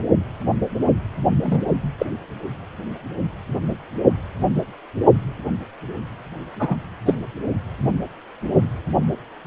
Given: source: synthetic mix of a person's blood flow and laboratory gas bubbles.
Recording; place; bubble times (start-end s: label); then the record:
Doppler ultrasound of blood flow; precordium
1.43-1.64 s: bubbles
1.99-2.06 s: bubbles
6.59-6.76 s: bubbles
7.05-7.15 s: bubbles
9.44-9.46 s: bubbles
From the record:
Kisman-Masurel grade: 123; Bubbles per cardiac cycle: 1 to 2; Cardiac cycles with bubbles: 10 to 50%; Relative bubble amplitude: loud (0.450 to 0.775); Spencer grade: 2 (many but less than half of the cardiac periods contain bubble signals, singularly or in groups); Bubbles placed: only in the low amplitude regions of the cardiac cycle